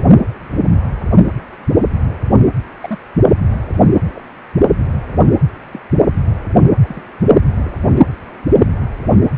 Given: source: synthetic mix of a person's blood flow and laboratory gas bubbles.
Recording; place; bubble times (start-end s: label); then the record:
Doppler ultrasound of blood flow; precordium
2.29-2.37 s: bubbles
2.81-2.99 s: bubbles
4.13-4.22 s: bubbles
5.72-5.79 s: bubbles
6.83-7.02 s: bubbles
7.58-7.71 s: bubbles
7.95-8.03 s: bubbles
From the record:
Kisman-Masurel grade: 121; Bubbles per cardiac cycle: 1 to 2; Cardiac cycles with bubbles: 10 to 50%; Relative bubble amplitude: barely perceptible (0.100 to 0.250); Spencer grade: 2 (many but less than half of the cardiac periods contain bubble signals, singularly or in groups); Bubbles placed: only in the low amplitude regions of the cardiac cycle